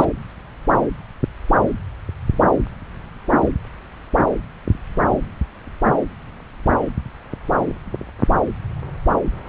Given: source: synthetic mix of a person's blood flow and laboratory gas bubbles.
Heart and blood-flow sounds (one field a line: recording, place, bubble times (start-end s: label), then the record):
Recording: Doppler ultrasound of blood flow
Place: subclavian vein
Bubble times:
0.00-0.05 s: bubbles
From the record:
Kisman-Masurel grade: 113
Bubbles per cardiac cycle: 1 to 2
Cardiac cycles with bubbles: 1 to 10%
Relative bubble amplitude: loud (0.450 to 0.775)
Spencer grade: 1 (occasional bubble signal discernible with the cardiac motion signal, with majority of cardiac periods free of bubbles)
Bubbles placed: anywhere in the cardiac cycle